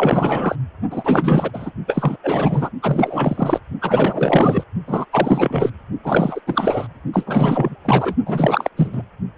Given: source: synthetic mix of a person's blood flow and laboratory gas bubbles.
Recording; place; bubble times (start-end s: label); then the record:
Doppler ultrasound of blood flow; precordium
0.00-0.56 s: bubbles
0.90-1.71 s: bubbles
1.87-2.17 s: bubbles
2.23-2.70 s: bubbles
2.82-3.60 s: bubbles
3.81-4.63 s: bubbles
4.87-5.05 s: bubbles
5.12-5.70 s: bubbles
6.04-6.41 s: bubbles
6.46-6.87 s: bubbles
7.13-7.75 s: bubbles
7.85-8.15 s: bubbles
8.26-8.70 s: bubbles
8.77-9.02 s: bubbles
From the record:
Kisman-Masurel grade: 444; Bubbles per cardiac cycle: continuous sound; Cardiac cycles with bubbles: 100%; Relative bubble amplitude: maximal (0.775 to 0.999); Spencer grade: 4 (maximum detectable bubble signal sounding continuously throughout systole and diastole of every cardiac period, and overriding the amplitude of the normal cardiac signals); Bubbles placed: only in the low amplitude regions of the cardiac cycle